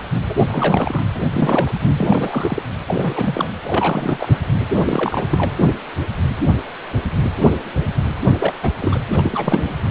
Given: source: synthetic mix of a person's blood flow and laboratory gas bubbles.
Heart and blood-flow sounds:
Doppler ultrasound of blood flow; precordium
0.28-0.35 s: bubbles
0.48-1.07 s: bubbles
1.14-1.21 s: bubbles
1.32-1.94 s: bubbles
1.97-2.62 s: bubbles
2.88-3.52 s: bubbles
3.63-4.39 s: bubbles
4.80-5.52 s: bubbles
8.37-8.71 s: bubbles
8.80-9.00 s: bubbles
9.09-9.77 s: bubbles
From the record:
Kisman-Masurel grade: 332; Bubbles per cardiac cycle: rolling drumbeat, 9 or more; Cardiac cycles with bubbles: 50 to 99%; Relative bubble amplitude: moderate (0.250 to 0.450); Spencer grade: 3 (all of the cardiac periods contain showers or single bubble signals, but not dominating or overriding the cardiac motion signals); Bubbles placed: anywhere in the cardiac cycle

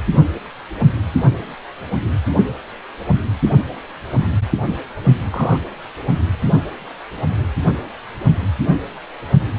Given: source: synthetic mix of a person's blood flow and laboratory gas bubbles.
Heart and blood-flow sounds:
Doppler ultrasound of blood flow; precordium
5.31-5.61 s: bubbles
From the record:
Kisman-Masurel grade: 122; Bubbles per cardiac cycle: 1 to 2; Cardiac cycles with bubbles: 10 to 50%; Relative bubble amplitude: moderate (0.250 to 0.450); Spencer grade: 2 (many but less than half of the cardiac periods contain bubble signals, singularly or in groups); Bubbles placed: only in the low amplitude regions of the cardiac cycle

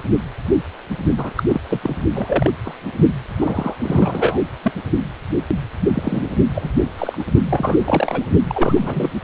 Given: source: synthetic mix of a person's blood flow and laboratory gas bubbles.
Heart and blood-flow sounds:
Doppler ultrasound of blood flow; precordium
0.09-0.20 s: bubbles
1.17-1.43 s: bubbles
1.49-1.61 s: bubbles
1.69-1.96 s: bubbles
2.15-2.50 s: bubbles
2.65-2.75 s: bubbles
3.36-3.75 s: bubbles
3.80-4.39 s: bubbles
4.62-4.72 s: bubbles
5.93-6.35 s: bubbles
6.54-6.69 s: bubbles
6.98-7.24 s: bubbles
7.50-8.26 s: bubbles
8.48-9.12 s: bubbles
From the record:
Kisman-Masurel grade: 232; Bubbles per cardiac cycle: several, 3 to 8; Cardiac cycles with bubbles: 50 to 99%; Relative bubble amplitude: moderate (0.250 to 0.450); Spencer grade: 3 (all of the cardiac periods contain showers or single bubble signals, but not dominating or overriding the cardiac motion signals); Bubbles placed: only in the low amplitude regions of the cardiac cycle

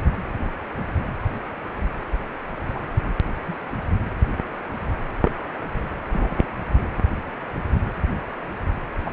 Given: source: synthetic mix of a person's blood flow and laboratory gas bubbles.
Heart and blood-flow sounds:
Doppler ultrasound of blood flow; precordium
2.75-2.83 s: bubbles
3.46-3.56 s: bubbles
5.25-5.31 s: bubbles
6.12-6.47 s: bubbles
9.05-9.11 s: bubbles
From the record:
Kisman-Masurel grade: 121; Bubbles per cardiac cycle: 1 to 2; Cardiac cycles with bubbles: 10 to 50%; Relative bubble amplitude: barely perceptible (0.100 to 0.250); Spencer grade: 2 (many but less than half of the cardiac periods contain bubble signals, singularly or in groups); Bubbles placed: anywhere in the cardiac cycle

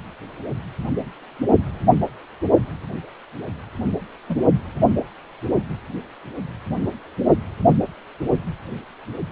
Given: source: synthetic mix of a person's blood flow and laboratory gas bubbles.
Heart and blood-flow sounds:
Doppler ultrasound of blood flow; precordium
4.28-4.37 s: bubbles
From the record:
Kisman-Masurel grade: 111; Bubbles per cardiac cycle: 1 to 2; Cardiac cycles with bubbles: 1 to 10%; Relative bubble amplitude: barely perceptible (0.100 to 0.250); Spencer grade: 1 (occasional bubble signal discernible with the cardiac motion signal, with majority of cardiac periods free of bubbles); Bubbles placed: only in the low amplitude regions of the cardiac cycle

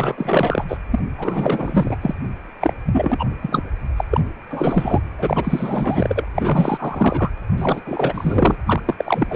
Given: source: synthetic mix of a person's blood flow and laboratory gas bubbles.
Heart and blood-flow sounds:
Doppler ultrasound of blood flow; precordium
0.00-0.65 s: bubbles
0.68-0.77 s: bubbles
0.91-0.99 s: bubbles
1.18-1.96 s: bubbles
2.02-2.15 s: bubbles
2.60-2.73 s: bubbles
2.85-3.26 s: bubbles
3.42-3.62 s: bubbles
3.97-4.04 s: bubbles
4.10-4.20 s: bubbles
4.50-5.00 s: bubbles
5.17-6.27 s: bubbles
6.34-7.30 s: bubbles
7.57-7.81 s: bubbles
7.86-8.55 s: bubbles
8.66-8.81 s: bubbles
8.85-8.95 s: bubbles
8.98-9.36 s: bubbles
From the record:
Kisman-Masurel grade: 444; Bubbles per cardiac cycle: continuous sound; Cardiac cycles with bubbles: 100%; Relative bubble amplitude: maximal (0.775 to 0.999); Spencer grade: 4 (maximum detectable bubble signal sounding continuously throughout systole and diastole of every cardiac period, and overriding the amplitude of the normal cardiac signals); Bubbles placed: anywhere in the cardiac cycle

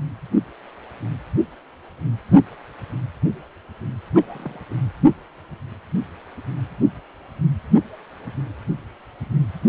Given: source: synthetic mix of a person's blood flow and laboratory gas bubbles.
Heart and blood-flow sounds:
Doppler ultrasound of blood flow; precordium
4.15-4.60 s: bubbles
4.70-4.75 s: bubbles
From the record:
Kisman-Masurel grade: 211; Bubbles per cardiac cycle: several, 3 to 8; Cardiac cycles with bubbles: 1 to 10%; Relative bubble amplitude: barely perceptible (0.100 to 0.250); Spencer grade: 1 (occasional bubble signal discernible with the cardiac motion signal, with majority of cardiac periods free of bubbles); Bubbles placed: only in the low amplitude regions of the cardiac cycle

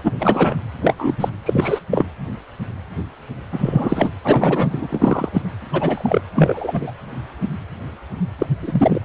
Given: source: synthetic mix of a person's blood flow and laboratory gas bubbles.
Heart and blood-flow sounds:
Doppler ultrasound of blood flow; precordium
0.03-0.12 s: bubbles
0.18-0.56 s: bubbles
0.82-0.94 s: bubbles
0.98-1.16 s: bubbles
1.20-1.29 s: bubbles
1.46-1.79 s: bubbles
1.91-2.06 s: bubbles
3.52-4.12 s: bubbles
4.24-5.29 s: bubbles
5.33-5.43 s: bubbles
5.72-6.21 s: bubbles
6.35-6.92 s: bubbles
8.38-8.46 s: bubbles
8.57-9.02 s: bubbles
From the record:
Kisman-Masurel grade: 233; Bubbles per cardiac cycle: several, 3 to 8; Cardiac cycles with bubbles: 50 to 99%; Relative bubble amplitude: loud (0.450 to 0.775); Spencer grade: 3 (all of the cardiac periods contain showers or single bubble signals, but not dominating or overriding the cardiac motion signals); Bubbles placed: anywhere in the cardiac cycle

